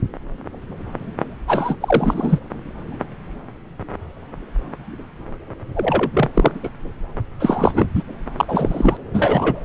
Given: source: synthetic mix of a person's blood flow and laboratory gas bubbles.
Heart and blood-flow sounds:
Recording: Doppler ultrasound of blood flow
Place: subclavian vein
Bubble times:
1.47-1.76 s: bubbles
1.80-2.39 s: bubbles
5.75-6.11 s: bubbles
6.13-6.29 s: bubbles
6.33-6.52 s: bubbles
6.62-6.70 s: bubbles
7.40-7.88 s: bubbles
7.95-8.04 s: bubbles
8.38-8.45 s: bubbles
8.47-8.97 s: bubbles
9.13-9.65 s: bubbles
From the record:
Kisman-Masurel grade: 233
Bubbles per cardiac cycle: several, 3 to 8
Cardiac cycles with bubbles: 50 to 99%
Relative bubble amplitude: loud (0.450 to 0.775)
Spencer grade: 3 (all of the cardiac periods contain showers or single bubble signals, but not dominating or overriding the cardiac motion signals)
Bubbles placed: anywhere in the cardiac cycle

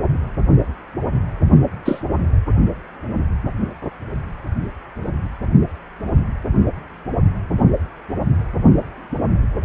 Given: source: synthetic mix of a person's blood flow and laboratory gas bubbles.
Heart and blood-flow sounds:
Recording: Doppler ultrasound of blood flow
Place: precordium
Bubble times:
1.85-2.02 s: bubbles
From the record:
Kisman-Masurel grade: 113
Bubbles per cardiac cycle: 1 to 2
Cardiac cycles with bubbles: 1 to 10%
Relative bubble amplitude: loud (0.450 to 0.775)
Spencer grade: 1 (occasional bubble signal discernible with the cardiac motion signal, with majority of cardiac periods free of bubbles)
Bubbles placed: anywhere in the cardiac cycle

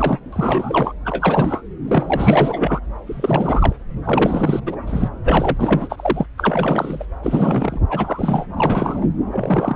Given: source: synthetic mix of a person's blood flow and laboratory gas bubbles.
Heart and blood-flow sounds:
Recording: Doppler ultrasound of blood flow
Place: subclavian vein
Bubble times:
0.00-0.19 s: bubbles
0.33-0.93 s: bubbles
1.05-1.62 s: bubbles
1.88-2.79 s: bubbles
3.06-3.72 s: bubbles
4.04-4.60 s: bubbles
4.66-4.75 s: bubbles
4.87-5.09 s: bubbles
5.23-6.26 s: bubbles
6.37-7.05 s: bubbles
7.22-7.79 s: bubbles
7.89-8.46 s: bubbles
8.57-9.10 s: bubbles
9.31-9.76 s: bubbles
From the record:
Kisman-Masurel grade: 343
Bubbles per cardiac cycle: rolling drumbeat, 9 or more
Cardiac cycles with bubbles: 100%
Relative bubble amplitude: loud (0.450 to 0.775)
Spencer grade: 3 (all of the cardiac periods contain showers or single bubble signals, but not dominating or overriding the cardiac motion signals)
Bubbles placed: anywhere in the cardiac cycle

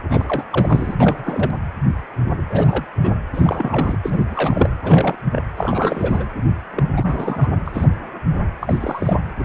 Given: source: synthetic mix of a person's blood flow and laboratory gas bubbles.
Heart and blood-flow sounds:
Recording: Doppler ultrasound of blood flow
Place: precordium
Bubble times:
0.10-0.44 s: bubbles
0.52-0.96 s: bubbles
1.00-1.51 s: bubbles
2.49-2.85 s: bubbles
3.01-3.13 s: bubbles
3.33-3.97 s: bubbles
4.03-4.69 s: bubbles
4.83-5.16 s: bubbles
5.32-5.43 s: bubbles
5.56-6.25 s: bubbles
6.71-6.84 s: bubbles
6.92-7.50 s: bubbles
7.65-7.88 s: bubbles
8.61-9.24 s: bubbles
9.38-9.45 s: bubbles
From the record:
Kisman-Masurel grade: 332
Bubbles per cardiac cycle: rolling drumbeat, 9 or more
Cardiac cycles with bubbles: 50 to 99%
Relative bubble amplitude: moderate (0.250 to 0.450)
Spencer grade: 3 (all of the cardiac periods contain showers or single bubble signals, but not dominating or overriding the cardiac motion signals)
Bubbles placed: anywhere in the cardiac cycle

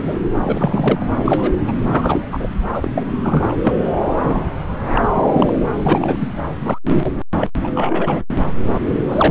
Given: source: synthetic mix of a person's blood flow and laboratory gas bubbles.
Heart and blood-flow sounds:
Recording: Doppler ultrasound of blood flow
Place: subclavian vein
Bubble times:
0.00-0.19 s: bubbles
0.42-1.05 s: bubbles
1.26-1.53 s: bubbles
1.68-1.72 s: bubbles
1.92-2.25 s: bubbles
2.32-2.47 s: bubbles
2.74-3.12 s: bubbles
3.23-3.60 s: bubbles
3.63-3.73 s: bubbles
4.23-4.43 s: bubbles
4.94-5.01 s: bubbles
5.15-5.59 s: bubbles
5.74-6.28 s: bubbles
6.64-6.79 s: bubbles
6.84-7.11 s: bubbles
7.36-7.50 s: bubbles
7.63-7.69 s: bubbles
7.75-8.21 s: bubbles
9.06-9.31 s: bubbles
From the record:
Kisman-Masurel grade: 242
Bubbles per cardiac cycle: several, 3 to 8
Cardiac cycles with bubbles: 100%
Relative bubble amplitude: moderate (0.250 to 0.450)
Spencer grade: 3 (all of the cardiac periods contain showers or single bubble signals, but not dominating or overriding the cardiac motion signals)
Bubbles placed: anywhere in the cardiac cycle

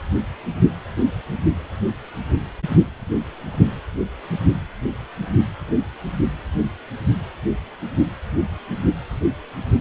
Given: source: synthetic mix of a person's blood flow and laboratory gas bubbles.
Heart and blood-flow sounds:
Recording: Doppler ultrasound of blood flow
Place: precordium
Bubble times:
no bubbles
From the record:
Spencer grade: 0 (complete lack of bubble signals)

